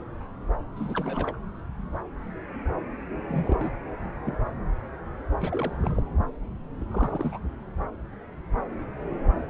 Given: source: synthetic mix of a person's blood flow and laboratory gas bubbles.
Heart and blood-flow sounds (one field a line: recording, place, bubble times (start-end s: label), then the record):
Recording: Doppler ultrasound of blood flow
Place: subclavian vein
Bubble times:
0.76-1.36 s: bubbles
3.29-3.56 s: bubbles
3.58-3.72 s: bubbles
4.25-4.35 s: bubbles
5.38-6.00 s: bubbles
6.80-6.84 s: bubbles
6.91-7.39 s: bubbles
From the record:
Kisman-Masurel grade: 221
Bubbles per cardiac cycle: several, 3 to 8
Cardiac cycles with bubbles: 10 to 50%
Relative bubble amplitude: barely perceptible (0.100 to 0.250)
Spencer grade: 2 (many but less than half of the cardiac periods contain bubble signals, singularly or in groups)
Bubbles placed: anywhere in the cardiac cycle